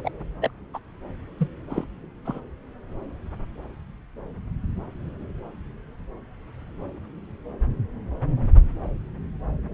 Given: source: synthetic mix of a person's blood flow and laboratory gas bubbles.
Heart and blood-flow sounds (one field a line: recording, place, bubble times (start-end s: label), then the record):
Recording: Doppler ultrasound of blood flow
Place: subclavian vein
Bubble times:
0.04-0.10 s: bubbles
0.41-0.51 s: bubbles
0.73-0.79 s: bubbles
1.37-1.48 s: bubbles
1.69-1.84 s: bubbles
2.25-2.40 s: bubbles
From the record:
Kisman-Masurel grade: 221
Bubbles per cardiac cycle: several, 3 to 8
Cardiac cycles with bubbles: 10 to 50%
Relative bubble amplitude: barely perceptible (0.100 to 0.250)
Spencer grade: 2 (many but less than half of the cardiac periods contain bubble signals, singularly or in groups)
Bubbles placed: anywhere in the cardiac cycle